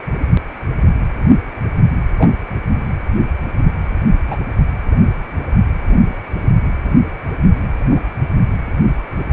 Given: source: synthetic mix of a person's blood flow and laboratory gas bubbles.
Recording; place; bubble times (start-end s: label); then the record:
Doppler ultrasound of blood flow; precordium
2.18-2.31 s: bubbles
4.28-4.37 s: bubbles
6.43-6.50 s: bubbles
7.91-8.00 s: bubbles
From the record:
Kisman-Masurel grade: 122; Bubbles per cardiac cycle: 1 to 2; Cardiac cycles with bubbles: 10 to 50%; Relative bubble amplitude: moderate (0.250 to 0.450); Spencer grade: 2 (many but less than half of the cardiac periods contain bubble signals, singularly or in groups); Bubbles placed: anywhere in the cardiac cycle